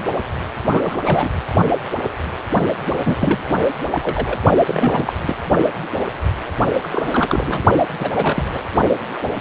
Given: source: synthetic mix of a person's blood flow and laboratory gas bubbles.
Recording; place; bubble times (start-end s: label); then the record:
Doppler ultrasound of blood flow; precordium
0.71-1.29 s: bubbles
2.85-3.16 s: bubbles
3.19-3.55 s: bubbles
3.91-4.00 s: bubbles
4.03-4.39 s: bubbles
4.67-5.13 s: bubbles
5.21-5.36 s: bubbles
6.83-6.88 s: bubbles
6.91-7.64 s: bubbles
8.00-8.12 s: bubbles
8.14-8.43 s: bubbles
8.53-8.61 s: bubbles
From the record:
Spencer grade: 3 (all of the cardiac periods contain showers or single bubble signals, but not dominating or overriding the cardiac motion signals); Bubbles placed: only in the low amplitude regions of the cardiac cycle